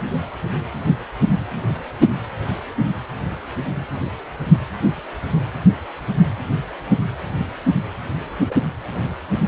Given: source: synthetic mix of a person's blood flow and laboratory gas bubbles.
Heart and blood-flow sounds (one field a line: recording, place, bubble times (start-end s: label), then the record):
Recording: Doppler ultrasound of blood flow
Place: precordium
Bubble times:
8.49-8.55 s: bubbles
From the record:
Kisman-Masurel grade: 112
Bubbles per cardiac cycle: 1 to 2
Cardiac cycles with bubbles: 1 to 10%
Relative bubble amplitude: moderate (0.250 to 0.450)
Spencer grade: 1 (occasional bubble signal discernible with the cardiac motion signal, with majority of cardiac periods free of bubbles)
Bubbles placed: anywhere in the cardiac cycle